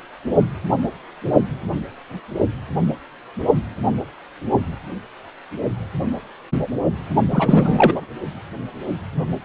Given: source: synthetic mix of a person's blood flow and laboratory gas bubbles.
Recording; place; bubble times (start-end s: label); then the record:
Doppler ultrasound of blood flow; precordium
7.30-8.05 s: bubbles
From the record:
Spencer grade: 2 (many but less than half of the cardiac periods contain bubble signals, singularly or in groups); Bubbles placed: only in the low amplitude regions of the cardiac cycle